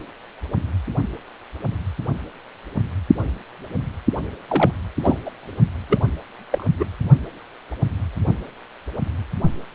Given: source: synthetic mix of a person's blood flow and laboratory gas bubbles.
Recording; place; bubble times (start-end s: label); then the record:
Doppler ultrasound of blood flow; precordium
4.47-4.71 s: bubbles
5.02-5.17 s: bubbles
5.25-5.30 s: bubbles
5.89-5.99 s: bubbles
6.51-6.65 s: bubbles
6.78-6.85 s: bubbles
From the record:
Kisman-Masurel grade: 222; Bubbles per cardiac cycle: several, 3 to 8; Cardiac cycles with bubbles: 10 to 50%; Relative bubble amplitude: moderate (0.250 to 0.450); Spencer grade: 2 (many but less than half of the cardiac periods contain bubble signals, singularly or in groups); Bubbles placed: only in the low amplitude regions of the cardiac cycle